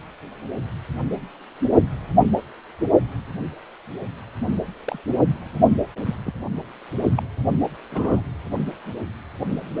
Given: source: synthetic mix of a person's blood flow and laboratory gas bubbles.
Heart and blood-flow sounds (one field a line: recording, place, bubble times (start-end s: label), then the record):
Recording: Doppler ultrasound of blood flow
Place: precordium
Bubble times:
4.86-4.98 s: bubbles
6.06-6.15 s: bubbles
6.26-6.31 s: bubbles
7.15-7.22 s: bubbles
7.92-8.21 s: bubbles
From the record:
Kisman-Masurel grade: 121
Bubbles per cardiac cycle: 1 to 2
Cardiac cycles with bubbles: 10 to 50%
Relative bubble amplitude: barely perceptible (0.100 to 0.250)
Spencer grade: 2 (many but less than half of the cardiac periods contain bubble signals, singularly or in groups)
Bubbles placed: only in the low amplitude regions of the cardiac cycle